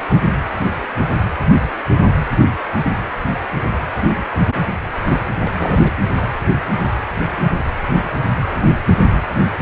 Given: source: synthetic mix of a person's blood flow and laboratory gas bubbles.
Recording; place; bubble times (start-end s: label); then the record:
Doppler ultrasound of blood flow; precordium
5.34-5.79 s: bubbles
5.83-5.91 s: bubbles
From the record:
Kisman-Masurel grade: 212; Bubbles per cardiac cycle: several, 3 to 8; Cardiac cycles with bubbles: 1 to 10%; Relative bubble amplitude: moderate (0.250 to 0.450); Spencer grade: 1 (occasional bubble signal discernible with the cardiac motion signal, with majority of cardiac periods free of bubbles); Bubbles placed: anywhere in the cardiac cycle